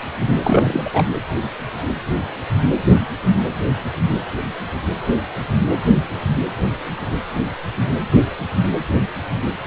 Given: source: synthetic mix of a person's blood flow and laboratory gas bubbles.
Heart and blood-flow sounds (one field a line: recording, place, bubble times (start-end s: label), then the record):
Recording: Doppler ultrasound of blood flow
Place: precordium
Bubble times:
0.43-1.07 s: bubbles
From the record:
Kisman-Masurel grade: 212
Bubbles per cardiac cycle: several, 3 to 8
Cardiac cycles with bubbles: 1 to 10%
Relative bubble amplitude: moderate (0.250 to 0.450)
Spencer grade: 1 (occasional bubble signal discernible with the cardiac motion signal, with majority of cardiac periods free of bubbles)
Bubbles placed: anywhere in the cardiac cycle